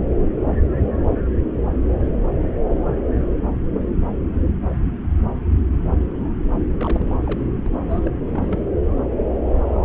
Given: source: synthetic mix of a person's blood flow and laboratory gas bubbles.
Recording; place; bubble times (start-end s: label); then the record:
Doppler ultrasound of blood flow; subclavian vein
6.78-7.16 s: bubbles
7.25-7.45 s: bubbles
7.47-7.53 s: bubbles
7.56-7.70 s: bubbles
7.89-8.02 s: bubbles
8.04-8.11 s: bubbles
8.28-8.60 s: bubbles
From the record:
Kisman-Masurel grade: 221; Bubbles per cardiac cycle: several, 3 to 8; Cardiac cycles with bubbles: 10 to 50%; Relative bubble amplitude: barely perceptible (0.100 to 0.250); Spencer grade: 2 (many but less than half of the cardiac periods contain bubble signals, singularly or in groups); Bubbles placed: anywhere in the cardiac cycle